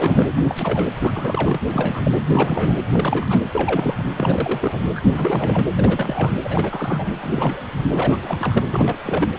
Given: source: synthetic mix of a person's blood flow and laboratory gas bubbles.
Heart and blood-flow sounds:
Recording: Doppler ultrasound of blood flow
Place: precordium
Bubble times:
0.00-0.28 s: bubbles
0.36-0.86 s: bubbles
0.99-1.60 s: bubbles
1.73-2.23 s: bubbles
2.27-2.77 s: bubbles
2.91-3.50 s: bubbles
3.54-4.05 s: bubbles
4.16-4.77 s: bubbles
4.94-5.01 s: bubbles
5.12-5.66 s: bubbles
5.73-6.32 s: bubbles
6.44-7.07 s: bubbles
7.20-7.62 s: bubbles
7.89-8.63 s: bubbles
8.70-8.98 s: bubbles
9.05-9.29 s: bubbles
From the record:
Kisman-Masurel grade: 342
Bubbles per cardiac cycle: rolling drumbeat, 9 or more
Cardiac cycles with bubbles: 100%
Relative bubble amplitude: moderate (0.250 to 0.450)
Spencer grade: 3 (all of the cardiac periods contain showers or single bubble signals, but not dominating or overriding the cardiac motion signals)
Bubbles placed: anywhere in the cardiac cycle

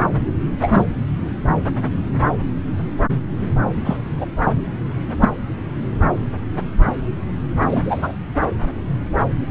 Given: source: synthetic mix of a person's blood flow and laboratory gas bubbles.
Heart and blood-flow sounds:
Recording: Doppler ultrasound of blood flow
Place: subclavian vein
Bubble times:
0.61-0.86 s: bubbles
3.84-3.97 s: bubbles
4.17-4.26 s: bubbles
5.20-5.29 s: bubbles
7.66-8.13 s: bubbles
From the record:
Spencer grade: 2 (many but less than half of the cardiac periods contain bubble signals, singularly or in groups)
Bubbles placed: anywhere in the cardiac cycle

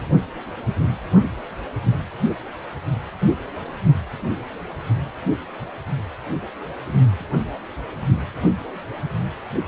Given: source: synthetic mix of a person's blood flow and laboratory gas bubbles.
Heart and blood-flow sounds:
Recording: Doppler ultrasound of blood flow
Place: precordium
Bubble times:
no bubbles
From the record:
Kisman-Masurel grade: 000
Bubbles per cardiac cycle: 0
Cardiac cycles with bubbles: 0%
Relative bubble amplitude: no bubbles discernible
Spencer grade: 0 (complete lack of bubble signals)

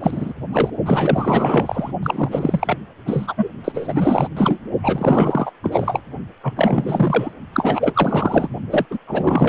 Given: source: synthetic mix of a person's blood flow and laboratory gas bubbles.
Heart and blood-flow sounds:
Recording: Doppler ultrasound of blood flow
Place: precordium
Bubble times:
0.00-0.33 s: bubbles
0.53-0.70 s: bubbles
0.85-1.92 s: bubbles
2.03-2.78 s: bubbles
3.06-3.48 s: bubbles
3.64-4.28 s: bubbles
4.36-4.59 s: bubbles
4.83-5.51 s: bubbles
5.63-6.01 s: bubbles
6.43-6.53 s: bubbles
6.56-7.31 s: bubbles
7.52-8.49 s: bubbles
8.70-8.86 s: bubbles
8.90-8.99 s: bubbles
9.07-9.49 s: bubbles
From the record:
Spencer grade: 4 (maximum detectable bubble signal sounding continuously throughout systole and diastole of every cardiac period, and overriding the amplitude of the normal cardiac signals)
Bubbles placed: only in the low amplitude regions of the cardiac cycle

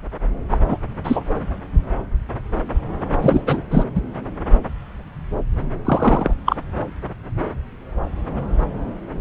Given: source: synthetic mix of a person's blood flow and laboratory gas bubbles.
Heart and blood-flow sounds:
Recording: Doppler ultrasound of blood flow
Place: subclavian vein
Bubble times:
0.51-0.57 s: bubbles
0.68-0.77 s: bubbles
1.04-1.22 s: bubbles
3.22-3.44 s: bubbles
3.46-3.61 s: bubbles
3.71-3.84 s: bubbles
3.94-4.02 s: bubbles
5.85-6.33 s: bubbles
6.46-6.56 s: bubbles
From the record:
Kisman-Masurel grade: 223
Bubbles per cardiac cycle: several, 3 to 8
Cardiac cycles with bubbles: 10 to 50%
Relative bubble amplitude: loud (0.450 to 0.775)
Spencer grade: 2 (many but less than half of the cardiac periods contain bubble signals, singularly or in groups)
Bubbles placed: anywhere in the cardiac cycle

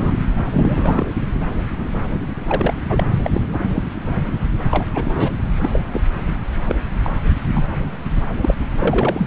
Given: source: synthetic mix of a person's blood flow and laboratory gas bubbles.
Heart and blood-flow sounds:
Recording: Doppler ultrasound of blood flow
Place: subclavian vein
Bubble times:
0.00-0.14 s: bubbles
0.52-1.06 s: bubbles
1.93-2.00 s: bubbles
2.47-2.74 s: bubbles
2.89-3.04 s: bubbles
3.24-3.30 s: bubbles
3.33-3.42 s: bubbles
3.67-3.83 s: bubbles
4.17-4.22 s: bubbles
4.71-4.86 s: bubbles
4.95-5.32 s: bubbles
5.62-5.69 s: bubbles
5.73-5.82 s: bubbles
5.92-6.01 s: bubbles
6.69-6.75 s: bubbles
7.03-7.10 s: bubbles
7.53-7.65 s: bubbles
8.42-8.54 s: bubbles
8.79-9.26 s: bubbles
From the record:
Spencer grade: 3 (all of the cardiac periods contain showers or single bubble signals, but not dominating or overriding the cardiac motion signals)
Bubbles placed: anywhere in the cardiac cycle

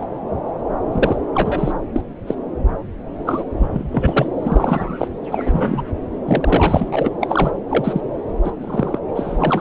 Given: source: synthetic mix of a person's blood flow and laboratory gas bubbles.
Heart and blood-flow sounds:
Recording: Doppler ultrasound of blood flow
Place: subclavian vein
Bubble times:
0.00-0.05 s: bubbles
0.92-1.16 s: bubbles
1.34-1.72 s: bubbles
1.96-2.01 s: bubbles
2.27-2.35 s: bubbles
3.25-3.45 s: bubbles
3.59-4.29 s: bubbles
4.43-5.08 s: bubbles
5.31-5.85 s: bubbles
6.25-7.11 s: bubbles
7.21-7.51 s: bubbles
7.69-8.01 s: bubbles
8.44-8.52 s: bubbles
8.60-8.99 s: bubbles
9.15-9.61 s: bubbles
From the record:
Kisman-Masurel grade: 243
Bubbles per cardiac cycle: several, 3 to 8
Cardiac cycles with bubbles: 100%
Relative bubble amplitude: loud (0.450 to 0.775)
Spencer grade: 3 (all of the cardiac periods contain showers or single bubble signals, but not dominating or overriding the cardiac motion signals)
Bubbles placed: anywhere in the cardiac cycle

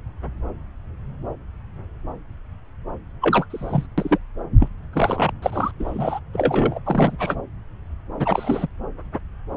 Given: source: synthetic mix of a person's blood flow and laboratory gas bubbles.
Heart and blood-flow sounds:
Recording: Doppler ultrasound of blood flow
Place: subclavian vein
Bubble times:
3.21-3.46 s: bubbles
3.50-3.86 s: bubbles
3.97-4.18 s: bubbles
4.59-4.68 s: bubbles
4.92-5.32 s: bubbles
5.42-5.71 s: bubbles
5.79-6.20 s: bubbles
6.33-6.79 s: bubbles
6.85-7.35 s: bubbles
8.19-8.68 s: bubbles
From the record:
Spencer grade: 3 (all of the cardiac periods contain showers or single bubble signals, but not dominating or overriding the cardiac motion signals)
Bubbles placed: anywhere in the cardiac cycle

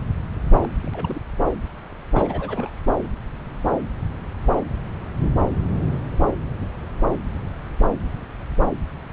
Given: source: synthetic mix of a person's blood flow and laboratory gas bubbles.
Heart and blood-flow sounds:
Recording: Doppler ultrasound of blood flow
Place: subclavian vein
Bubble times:
0.59-0.70 s: bubbles
0.82-1.21 s: bubbles
2.11-2.70 s: bubbles
From the record:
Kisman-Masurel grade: 211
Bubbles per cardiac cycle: several, 3 to 8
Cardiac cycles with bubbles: 1 to 10%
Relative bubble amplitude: barely perceptible (0.100 to 0.250)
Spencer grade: 1 (occasional bubble signal discernible with the cardiac motion signal, with majority of cardiac periods free of bubbles)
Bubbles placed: anywhere in the cardiac cycle

